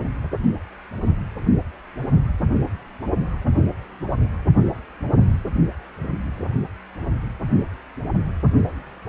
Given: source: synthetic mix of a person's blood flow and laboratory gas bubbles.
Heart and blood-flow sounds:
Doppler ultrasound of blood flow; precordium
no bubbles
From the record:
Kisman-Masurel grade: 000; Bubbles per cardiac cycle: 0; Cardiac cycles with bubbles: 0%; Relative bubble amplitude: no bubbles discernible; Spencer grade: 0 (complete lack of bubble signals)

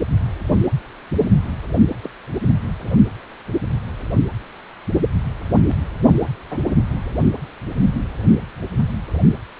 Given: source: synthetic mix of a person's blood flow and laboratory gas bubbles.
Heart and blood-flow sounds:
Doppler ultrasound of blood flow; precordium
2.04-2.08 s: bubbles
6.06-6.14 s: bubbles
6.50-6.59 s: bubbles
From the record:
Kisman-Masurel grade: 121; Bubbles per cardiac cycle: 1 to 2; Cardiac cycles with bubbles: 10 to 50%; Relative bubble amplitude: barely perceptible (0.100 to 0.250); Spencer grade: 2 (many but less than half of the cardiac periods contain bubble signals, singularly or in groups); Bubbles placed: only in the low amplitude regions of the cardiac cycle

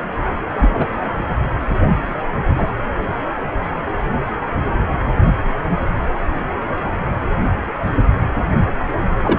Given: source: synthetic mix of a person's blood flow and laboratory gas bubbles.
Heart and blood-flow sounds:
Doppler ultrasound of blood flow; precordium
0.57-0.89 s: bubbles
2.56-2.69 s: bubbles
9.24-9.39 s: bubbles
From the record:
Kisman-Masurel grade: 113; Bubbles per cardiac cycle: 1 to 2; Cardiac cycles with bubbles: 1 to 10%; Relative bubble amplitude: loud (0.450 to 0.775); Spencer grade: 1 (occasional bubble signal discernible with the cardiac motion signal, with majority of cardiac periods free of bubbles); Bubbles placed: anywhere in the cardiac cycle

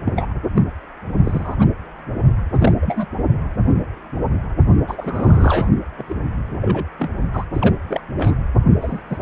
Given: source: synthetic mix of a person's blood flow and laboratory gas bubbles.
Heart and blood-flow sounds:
Doppler ultrasound of blood flow; precordium
0.05-0.14 s: bubbles
0.16-0.33 s: bubbles
0.55-0.62 s: bubbles
1.25-1.56 s: bubbles
1.59-1.66 s: bubbles
2.54-2.73 s: bubbles
2.82-3.07 s: bubbles
4.88-5.67 s: bubbles
5.98-6.04 s: bubbles
6.09-6.16 s: bubbles
6.61-6.85 s: bubbles
6.99-7.10 s: bubbles
7.32-7.45 s: bubbles
7.54-7.74 s: bubbles
7.88-8.00 s: bubbles
8.17-8.35 s: bubbles
8.80-9.01 s: bubbles
9.09-9.17 s: bubbles
From the record:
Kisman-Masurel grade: 232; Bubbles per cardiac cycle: several, 3 to 8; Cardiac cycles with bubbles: 50 to 99%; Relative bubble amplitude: moderate (0.250 to 0.450); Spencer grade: 3 (all of the cardiac periods contain showers or single bubble signals, but not dominating or overriding the cardiac motion signals); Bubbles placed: only in the low amplitude regions of the cardiac cycle

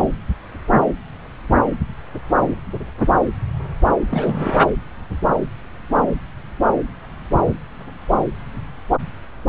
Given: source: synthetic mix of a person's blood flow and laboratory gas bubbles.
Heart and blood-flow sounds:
Doppler ultrasound of blood flow; subclavian vein
4.11-4.58 s: bubbles
From the record:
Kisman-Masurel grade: 222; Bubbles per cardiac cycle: several, 3 to 8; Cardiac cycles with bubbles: 10 to 50%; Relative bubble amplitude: moderate (0.250 to 0.450); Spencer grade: 2 (many but less than half of the cardiac periods contain bubble signals, singularly or in groups); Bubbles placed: anywhere in the cardiac cycle

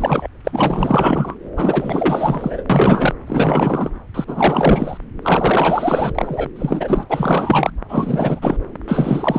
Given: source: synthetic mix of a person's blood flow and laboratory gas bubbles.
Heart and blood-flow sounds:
Doppler ultrasound of blood flow; subclavian vein
0.00-0.28 s: bubbles
0.44-1.35 s: bubbles
1.56-2.65 s: bubbles
2.69-3.13 s: bubbles
3.26-3.91 s: bubbles
4.14-4.97 s: bubbles
5.22-6.50 s: bubbles
6.56-7.04 s: bubbles
7.09-7.70 s: bubbles
7.89-8.58 s: bubbles
8.88-9.39 s: bubbles
From the record:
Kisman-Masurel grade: 444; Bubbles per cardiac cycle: continuous sound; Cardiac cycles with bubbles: 100%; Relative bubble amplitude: maximal (0.775 to 0.999); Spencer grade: 4 (maximum detectable bubble signal sounding continuously throughout systole and diastole of every cardiac period, and overriding the amplitude of the normal cardiac signals); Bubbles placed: anywhere in the cardiac cycle

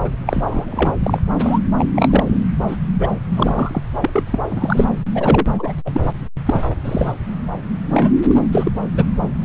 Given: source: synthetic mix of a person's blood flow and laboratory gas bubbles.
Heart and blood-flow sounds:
Doppler ultrasound of blood flow; subclavian vein
0.04-0.09 s: bubbles
0.27-0.93 s: bubbles
1.03-1.20 s: bubbles
1.39-1.59 s: bubbles
1.77-1.91 s: bubbles
1.95-2.38 s: bubbles
2.67-2.76 s: bubbles
2.99-3.07 s: bubbles
3.32-3.82 s: bubbles
4.00-4.23 s: bubbles
4.26-4.39 s: bubbles
4.50-4.88 s: bubbles
5.15-5.73 s: bubbles
5.85-5.91 s: bubbles
5.93-6.01 s: bubbles
6.45-6.60 s: bubbles
6.84-7.12 s: bubbles
7.91-8.10 s: bubbles
8.27-8.36 s: bubbles
8.52-8.71 s: bubbles
8.93-9.05 s: bubbles
From the record:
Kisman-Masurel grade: 243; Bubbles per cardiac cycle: several, 3 to 8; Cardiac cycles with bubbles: 100%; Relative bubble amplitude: loud (0.450 to 0.775); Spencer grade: 3 (all of the cardiac periods contain showers or single bubble signals, but not dominating or overriding the cardiac motion signals); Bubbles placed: anywhere in the cardiac cycle

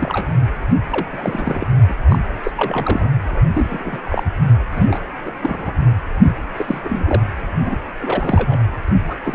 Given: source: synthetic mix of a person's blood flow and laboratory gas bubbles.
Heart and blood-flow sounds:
Doppler ultrasound of blood flow; precordium
0.00-0.27 s: bubbles
0.90-1.07 s: bubbles
1.12-1.67 s: bubbles
1.88-1.94 s: bubbles
2.08-2.19 s: bubbles
2.43-2.51 s: bubbles
2.57-3.10 s: bubbles
3.24-3.42 s: bubbles
3.53-3.99 s: bubbles
4.01-4.24 s: bubbles
4.71-5.02 s: bubbles
5.26-5.32 s: bubbles
5.41-5.72 s: bubbles
6.17-6.33 s: bubbles
6.56-6.81 s: bubbles
6.84-7.21 s: bubbles
7.65-7.77 s: bubbles
8.00-8.61 s: bubbles
8.88-8.92 s: bubbles
9.07-9.15 s: bubbles
9.24-9.35 s: bubbles
From the record:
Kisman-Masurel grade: 242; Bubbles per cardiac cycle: several, 3 to 8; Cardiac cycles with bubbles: 100%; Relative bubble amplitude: moderate (0.250 to 0.450); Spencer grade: 3 (all of the cardiac periods contain showers or single bubble signals, but not dominating or overriding the cardiac motion signals); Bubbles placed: anywhere in the cardiac cycle

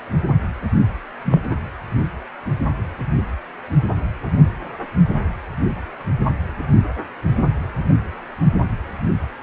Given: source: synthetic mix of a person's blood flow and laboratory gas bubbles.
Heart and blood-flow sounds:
Doppler ultrasound of blood flow; precordium
1.24-1.40 s: bubbles
1.50-1.55 s: bubbles
From the record:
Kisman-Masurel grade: 112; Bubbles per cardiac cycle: 1 to 2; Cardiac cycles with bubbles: 1 to 10%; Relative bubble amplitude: moderate (0.250 to 0.450); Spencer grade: 1 (occasional bubble signal discernible with the cardiac motion signal, with majority of cardiac periods free of bubbles); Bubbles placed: anywhere in the cardiac cycle

